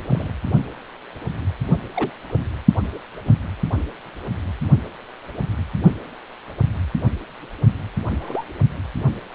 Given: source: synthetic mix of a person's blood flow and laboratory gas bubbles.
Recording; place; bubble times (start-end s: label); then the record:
Doppler ultrasound of blood flow; precordium
0.09-0.32 s: bubbles
1.94-2.12 s: bubbles
2.26-2.39 s: bubbles
2.94-2.98 s: bubbles
3.25-3.35 s: bubbles
8.20-8.44 s: bubbles
From the record:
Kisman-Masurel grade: 121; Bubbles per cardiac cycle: 1 to 2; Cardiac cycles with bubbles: 10 to 50%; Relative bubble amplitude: barely perceptible (0.100 to 0.250); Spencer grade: 2 (many but less than half of the cardiac periods contain bubble signals, singularly or in groups); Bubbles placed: only in the low amplitude regions of the cardiac cycle